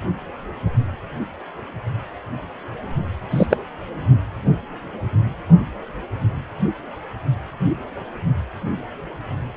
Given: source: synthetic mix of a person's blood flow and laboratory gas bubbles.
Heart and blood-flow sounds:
Doppler ultrasound of blood flow; precordium
3.30-3.46 s: bubbles
3.50-3.57 s: bubbles
From the record:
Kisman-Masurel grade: 113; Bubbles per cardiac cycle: 1 to 2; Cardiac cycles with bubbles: 1 to 10%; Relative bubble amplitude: loud (0.450 to 0.775); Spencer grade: 1 (occasional bubble signal discernible with the cardiac motion signal, with majority of cardiac periods free of bubbles); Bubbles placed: only in the low amplitude regions of the cardiac cycle

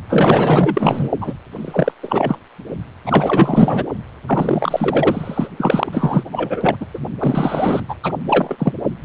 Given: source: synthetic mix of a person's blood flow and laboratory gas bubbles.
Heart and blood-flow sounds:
Doppler ultrasound of blood flow; precordium
0.09-1.09 s: bubbles
1.21-1.33 s: bubbles
1.51-1.94 s: bubbles
2.03-2.38 s: bubbles
3.06-3.86 s: bubbles
4.26-5.49 s: bubbles
5.57-6.24 s: bubbles
6.31-6.75 s: bubbles
6.80-6.86 s: bubbles
6.94-6.99 s: bubbles
7.18-7.80 s: bubbles
7.89-7.95 s: bubbles
8.03-8.12 s: bubbles
8.26-8.72 s: bubbles
From the record:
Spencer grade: 4 (maximum detectable bubble signal sounding continuously throughout systole and diastole of every cardiac period, and overriding the amplitude of the normal cardiac signals); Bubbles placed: only in the low amplitude regions of the cardiac cycle

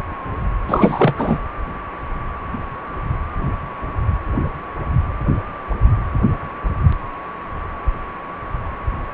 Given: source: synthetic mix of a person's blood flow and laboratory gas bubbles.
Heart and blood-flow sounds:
Doppler ultrasound of blood flow; precordium
0.67-1.15 s: bubbles
1.17-1.38 s: bubbles
From the record:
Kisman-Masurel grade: 213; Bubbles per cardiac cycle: several, 3 to 8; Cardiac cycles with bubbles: 1 to 10%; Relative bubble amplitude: loud (0.450 to 0.775); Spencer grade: 1 (occasional bubble signal discernible with the cardiac motion signal, with majority of cardiac periods free of bubbles); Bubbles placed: anywhere in the cardiac cycle

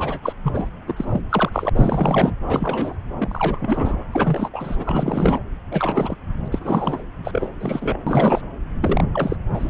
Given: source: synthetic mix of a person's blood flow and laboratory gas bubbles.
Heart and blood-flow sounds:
Doppler ultrasound of blood flow; subclavian vein
0.00-0.20 s: bubbles
0.22-0.33 s: bubbles
0.43-0.69 s: bubbles
0.87-0.94 s: bubbles
0.97-1.21 s: bubbles
1.29-1.50 s: bubbles
1.53-1.70 s: bubbles
1.75-2.34 s: bubbles
2.46-2.98 s: bubbles
3.18-4.04 s: bubbles
4.12-4.50 s: bubbles
4.53-5.40 s: bubbles
5.71-6.16 s: bubbles
6.44-6.48 s: bubbles
6.51-7.02 s: bubbles
7.24-7.51 s: bubbles
7.60-8.01 s: bubbles
8.07-8.42 s: bubbles
8.81-9.04 s: bubbles
9.14-9.37 s: bubbles
9.54-9.70 s: bubbles
From the record:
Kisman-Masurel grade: 342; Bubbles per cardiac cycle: rolling drumbeat, 9 or more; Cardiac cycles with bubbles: 100%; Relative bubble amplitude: moderate (0.250 to 0.450); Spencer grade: 3 (all of the cardiac periods contain showers or single bubble signals, but not dominating or overriding the cardiac motion signals); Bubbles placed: anywhere in the cardiac cycle

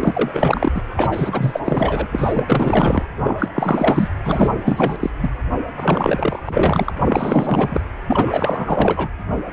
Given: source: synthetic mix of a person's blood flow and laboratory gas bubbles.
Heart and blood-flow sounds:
Doppler ultrasound of blood flow; precordium
0.01-0.82 s: bubbles
0.96-1.61 s: bubbles
1.64-2.08 s: bubbles
2.12-3.03 s: bubbles
3.23-3.48 s: bubbles
3.53-4.08 s: bubbles
4.24-4.53 s: bubbles
4.64-4.96 s: bubbles
5.00-5.10 s: bubbles
5.21-5.30 s: bubbles
5.77-6.42 s: bubbles
6.46-6.90 s: bubbles
7.00-7.81 s: bubbles
8.07-9.09 s: bubbles
From the record:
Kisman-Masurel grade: 444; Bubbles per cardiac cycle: continuous sound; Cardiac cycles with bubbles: 100%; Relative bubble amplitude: maximal (0.775 to 0.999); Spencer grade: 4 (maximum detectable bubble signal sounding continuously throughout systole and diastole of every cardiac period, and overriding the amplitude of the normal cardiac signals); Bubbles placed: anywhere in the cardiac cycle

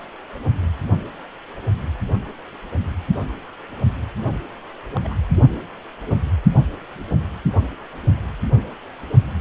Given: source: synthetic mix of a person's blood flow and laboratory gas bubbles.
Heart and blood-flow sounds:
Doppler ultrasound of blood flow; precordium
4.91-4.97 s: bubbles
5.04-5.15 s: bubbles
From the record:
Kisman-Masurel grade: 221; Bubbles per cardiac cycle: several, 3 to 8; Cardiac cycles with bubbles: 10 to 50%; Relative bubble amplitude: barely perceptible (0.100 to 0.250); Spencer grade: 2 (many but less than half of the cardiac periods contain bubble signals, singularly or in groups); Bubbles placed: only in the low amplitude regions of the cardiac cycle

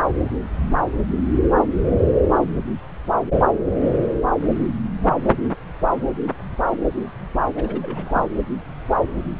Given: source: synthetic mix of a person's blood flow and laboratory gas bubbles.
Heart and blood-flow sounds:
Doppler ultrasound of blood flow; subclavian vein
7.56-7.79 s: bubbles
7.82-8.26 s: bubbles
From the record:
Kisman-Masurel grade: 211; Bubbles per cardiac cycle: several, 3 to 8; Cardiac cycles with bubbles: 1 to 10%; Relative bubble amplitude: barely perceptible (0.100 to 0.250); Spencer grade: 1 (occasional bubble signal discernible with the cardiac motion signal, with majority of cardiac periods free of bubbles); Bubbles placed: anywhere in the cardiac cycle

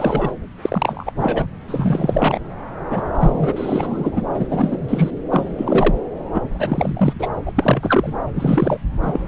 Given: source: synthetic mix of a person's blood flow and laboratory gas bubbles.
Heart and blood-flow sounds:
Doppler ultrasound of blood flow; subclavian vein
0.00-0.32 s: bubbles
0.61-1.12 s: bubbles
1.17-1.46 s: bubbles
1.68-2.40 s: bubbles
2.90-3.01 s: bubbles
3.13-4.21 s: bubbles
4.35-4.47 s: bubbles
4.50-5.11 s: bubbles
5.30-5.95 s: bubbles
6.33-6.42 s: bubbles
6.50-7.13 s: bubbles
7.19-7.29 s: bubbles
7.46-7.52 s: bubbles
7.54-8.14 s: bubbles
8.35-8.80 s: bubbles
9.02-9.20 s: bubbles
From the record:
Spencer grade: 3 (all of the cardiac periods contain showers or single bubble signals, but not dominating or overriding the cardiac motion signals); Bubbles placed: anywhere in the cardiac cycle

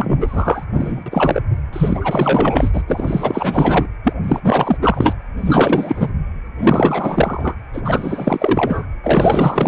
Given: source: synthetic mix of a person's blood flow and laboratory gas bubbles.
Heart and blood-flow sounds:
Doppler ultrasound of blood flow; precordium
0.00-0.65 s: bubbles
0.73-1.03 s: bubbles
1.06-1.41 s: bubbles
1.72-2.83 s: bubbles
2.87-3.89 s: bubbles
4.04-4.14 s: bubbles
4.23-4.40 s: bubbles
4.44-4.77 s: bubbles
4.81-5.15 s: bubbles
5.36-6.10 s: bubbles
6.58-7.55 s: bubbles
7.73-7.81 s: bubbles
7.84-8.87 s: bubbles
9.03-9.67 s: bubbles
From the record:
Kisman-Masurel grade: 444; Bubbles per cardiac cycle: continuous sound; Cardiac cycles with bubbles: 100%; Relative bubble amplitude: maximal (0.775 to 0.999); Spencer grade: 4 (maximum detectable bubble signal sounding continuously throughout systole and diastole of every cardiac period, and overriding the amplitude of the normal cardiac signals); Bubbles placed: anywhere in the cardiac cycle

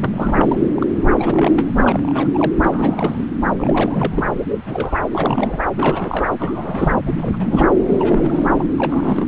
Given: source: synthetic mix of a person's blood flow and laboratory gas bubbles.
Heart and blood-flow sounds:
Doppler ultrasound of blood flow; subclavian vein
0.00-0.57 s: bubbles
0.74-0.86 s: bubbles
0.98-1.71 s: bubbles
1.76-2.52 s: bubbles
2.64-3.25 s: bubbles
3.58-4.29 s: bubbles
4.66-4.98 s: bubbles
5.12-5.59 s: bubbles
5.76-6.29 s: bubbles
6.39-6.95 s: bubbles
7.05-7.18 s: bubbles
7.21-7.67 s: bubbles
7.88-8.67 s: bubbles
8.78-9.28 s: bubbles
From the record:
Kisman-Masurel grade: 342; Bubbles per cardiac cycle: rolling drumbeat, 9 or more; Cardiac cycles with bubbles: 100%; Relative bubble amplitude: moderate (0.250 to 0.450); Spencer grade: 3 (all of the cardiac periods contain showers or single bubble signals, but not dominating or overriding the cardiac motion signals); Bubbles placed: anywhere in the cardiac cycle

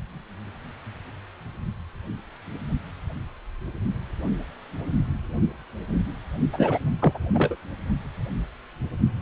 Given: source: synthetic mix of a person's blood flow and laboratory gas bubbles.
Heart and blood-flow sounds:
Doppler ultrasound of blood flow; precordium
6.53-6.78 s: bubbles
7.00-7.18 s: bubbles
7.34-7.55 s: bubbles
From the record:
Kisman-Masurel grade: 212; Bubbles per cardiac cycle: several, 3 to 8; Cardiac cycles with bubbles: 1 to 10%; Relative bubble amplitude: moderate (0.250 to 0.450); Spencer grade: 1 (occasional bubble signal discernible with the cardiac motion signal, with majority of cardiac periods free of bubbles); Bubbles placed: only in the low amplitude regions of the cardiac cycle

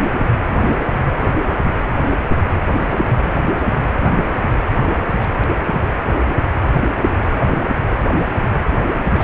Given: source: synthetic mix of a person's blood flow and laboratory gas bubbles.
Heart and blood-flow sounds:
Doppler ultrasound of blood flow; precordium
3.05-3.36 s: bubbles
4.76-4.85 s: bubbles
5.20-5.27 s: bubbles
6.94-7.04 s: bubbles
9.12-9.24 s: bubbles
From the record:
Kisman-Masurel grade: 121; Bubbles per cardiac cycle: 1 to 2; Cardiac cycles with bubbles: 10 to 50%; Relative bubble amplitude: barely perceptible (0.100 to 0.250); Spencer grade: 2 (many but less than half of the cardiac periods contain bubble signals, singularly or in groups); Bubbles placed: anywhere in the cardiac cycle

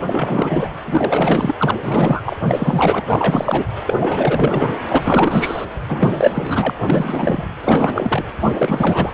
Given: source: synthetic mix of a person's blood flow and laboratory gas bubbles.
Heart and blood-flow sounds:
Doppler ultrasound of blood flow; precordium
0.06-0.70 s: bubbles
0.84-1.55 s: bubbles
1.58-1.71 s: bubbles
1.83-2.22 s: bubbles
2.25-2.37 s: bubbles
2.45-3.05 s: bubbles
3.08-3.66 s: bubbles
3.87-4.70 s: bubbles
4.88-5.66 s: bubbles
5.88-6.74 s: bubbles
6.82-7.45 s: bubbles
7.63-8.24 s: bubbles
8.42-9.14 s: bubbles
From the record:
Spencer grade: 4 (maximum detectable bubble signal sounding continuously throughout systole and diastole of every cardiac period, and overriding the amplitude of the normal cardiac signals); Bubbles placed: anywhere in the cardiac cycle

